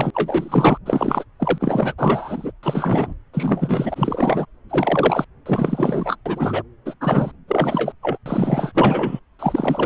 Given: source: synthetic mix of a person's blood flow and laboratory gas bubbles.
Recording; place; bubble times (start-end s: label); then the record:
Doppler ultrasound of blood flow; subclavian vein
0.00-0.10 s: bubbles
0.13-0.77 s: bubbles
0.85-1.24 s: bubbles
1.40-1.93 s: bubbles
1.98-2.52 s: bubbles
2.63-3.13 s: bubbles
3.33-4.46 s: bubbles
4.69-5.25 s: bubbles
5.46-6.16 s: bubbles
6.25-6.62 s: bubbles
6.85-6.93 s: bubbles
7.00-7.31 s: bubbles
7.48-7.92 s: bubbles
8.02-8.17 s: bubbles
8.25-8.72 s: bubbles
8.74-9.20 s: bubbles
9.39-9.86 s: bubbles
From the record:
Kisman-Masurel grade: 343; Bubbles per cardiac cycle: rolling drumbeat, 9 or more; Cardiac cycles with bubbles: 100%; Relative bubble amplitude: loud (0.450 to 0.775); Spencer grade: 3 (all of the cardiac periods contain showers or single bubble signals, but not dominating or overriding the cardiac motion signals); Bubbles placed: anywhere in the cardiac cycle